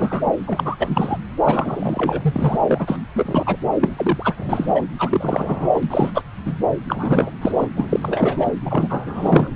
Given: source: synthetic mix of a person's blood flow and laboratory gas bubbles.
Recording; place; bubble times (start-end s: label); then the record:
Doppler ultrasound of blood flow; subclavian vein
0.00-0.31 s: bubbles
0.47-0.76 s: bubbles
0.79-1.18 s: bubbles
1.44-2.58 s: bubbles
2.66-2.98 s: bubbles
3.15-3.57 s: bubbles
3.81-4.83 s: bubbles
4.98-5.70 s: bubbles
5.74-6.21 s: bubbles
6.45-6.56 s: bubbles
6.88-7.30 s: bubbles
7.42-7.52 s: bubbles
7.57-7.67 s: bubbles
7.76-8.52 s: bubbles
8.65-9.53 s: bubbles
From the record:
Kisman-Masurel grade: 343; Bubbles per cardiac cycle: rolling drumbeat, 9 or more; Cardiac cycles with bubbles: 100%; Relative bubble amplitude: loud (0.450 to 0.775); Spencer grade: 3 (all of the cardiac periods contain showers or single bubble signals, but not dominating or overriding the cardiac motion signals); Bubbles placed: anywhere in the cardiac cycle